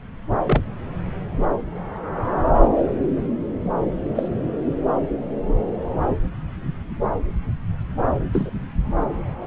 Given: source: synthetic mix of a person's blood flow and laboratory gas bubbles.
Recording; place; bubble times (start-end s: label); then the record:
Doppler ultrasound of blood flow; subclavian vein
0.31-0.64 s: bubbles
4.15-4.28 s: bubbles
8.33-8.50 s: bubbles
From the record:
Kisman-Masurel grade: 122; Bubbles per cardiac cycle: 1 to 2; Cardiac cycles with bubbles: 10 to 50%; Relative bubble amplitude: moderate (0.250 to 0.450); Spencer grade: 2 (many but less than half of the cardiac periods contain bubble signals, singularly or in groups); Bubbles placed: anywhere in the cardiac cycle